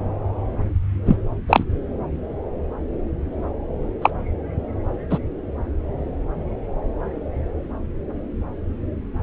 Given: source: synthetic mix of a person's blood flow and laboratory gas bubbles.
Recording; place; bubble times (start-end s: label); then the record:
Doppler ultrasound of blood flow; subclavian vein
1.05-1.17 s: bubbles
1.48-1.64 s: bubbles
4.01-4.11 s: bubbles
5.10-5.19 s: bubbles
From the record:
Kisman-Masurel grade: 123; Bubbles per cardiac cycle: 1 to 2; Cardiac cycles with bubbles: 10 to 50%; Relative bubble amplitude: loud (0.450 to 0.775); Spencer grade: 2 (many but less than half of the cardiac periods contain bubble signals, singularly or in groups); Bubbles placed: anywhere in the cardiac cycle